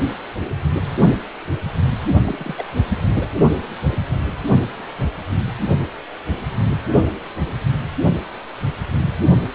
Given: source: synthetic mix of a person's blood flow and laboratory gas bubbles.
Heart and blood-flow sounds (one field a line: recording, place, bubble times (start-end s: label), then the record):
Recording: Doppler ultrasound of blood flow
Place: precordium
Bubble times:
2.23-2.54 s: bubbles
2.58-2.63 s: bubbles
2.82-3.32 s: bubbles
From the record:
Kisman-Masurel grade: 221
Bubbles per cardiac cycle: several, 3 to 8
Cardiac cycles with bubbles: 10 to 50%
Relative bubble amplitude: barely perceptible (0.100 to 0.250)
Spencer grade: 2 (many but less than half of the cardiac periods contain bubble signals, singularly or in groups)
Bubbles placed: only in the low amplitude regions of the cardiac cycle